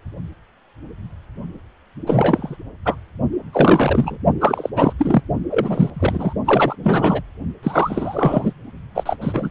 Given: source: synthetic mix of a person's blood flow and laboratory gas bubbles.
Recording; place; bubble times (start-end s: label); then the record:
Doppler ultrasound of blood flow; precordium
2.06-2.56 s: bubbles
2.85-2.96 s: bubbles
3.53-4.17 s: bubbles
4.40-4.70 s: bubbles
4.75-4.93 s: bubbles
4.99-5.21 s: bubbles
5.50-5.90 s: bubbles
5.95-6.33 s: bubbles
6.45-6.76 s: bubbles
6.83-7.21 s: bubbles
7.63-8.53 s: bubbles
8.95-9.17 s: bubbles
9.21-9.50 s: bubbles
From the record:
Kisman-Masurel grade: 333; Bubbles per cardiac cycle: rolling drumbeat, 9 or more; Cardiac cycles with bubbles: 50 to 99%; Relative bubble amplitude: loud (0.450 to 0.775); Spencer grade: 3 (all of the cardiac periods contain showers or single bubble signals, but not dominating or overriding the cardiac motion signals); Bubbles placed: only in the low amplitude regions of the cardiac cycle